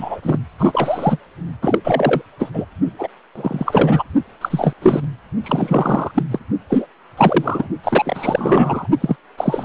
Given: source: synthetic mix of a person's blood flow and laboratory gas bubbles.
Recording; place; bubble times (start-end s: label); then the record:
Doppler ultrasound of blood flow; precordium
0.00-0.20 s: bubbles
0.23-0.39 s: bubbles
0.58-1.18 s: bubbles
1.61-1.78 s: bubbles
1.84-2.21 s: bubbles
2.39-2.50 s: bubbles
2.53-2.65 s: bubbles
2.98-3.08 s: bubbles
3.35-4.04 s: bubbles
4.41-4.74 s: bubbles
4.82-5.04 s: bubbles
5.43-6.11 s: bubbles
6.14-6.22 s: bubbles
6.30-6.39 s: bubbles
6.70-6.87 s: bubbles
7.17-7.68 s: bubbles
7.83-8.88 s: bubbles
9.00-9.16 s: bubbles
9.37-9.65 s: bubbles
From the record:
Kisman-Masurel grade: 343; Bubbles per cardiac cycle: rolling drumbeat, 9 or more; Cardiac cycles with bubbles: 100%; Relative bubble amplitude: loud (0.450 to 0.775); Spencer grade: 3 (all of the cardiac periods contain showers or single bubble signals, but not dominating or overriding the cardiac motion signals); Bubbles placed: only in the low amplitude regions of the cardiac cycle